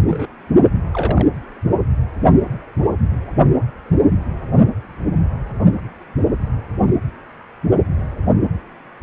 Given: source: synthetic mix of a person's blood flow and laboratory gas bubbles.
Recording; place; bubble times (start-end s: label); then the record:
Doppler ultrasound of blood flow; precordium
0.08-0.27 s: bubbles
0.92-1.27 s: bubbles
From the record:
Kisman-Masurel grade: 122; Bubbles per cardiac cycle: 1 to 2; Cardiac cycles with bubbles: 10 to 50%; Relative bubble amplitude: moderate (0.250 to 0.450); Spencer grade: 2 (many but less than half of the cardiac periods contain bubble signals, singularly or in groups); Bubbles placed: only in the low amplitude regions of the cardiac cycle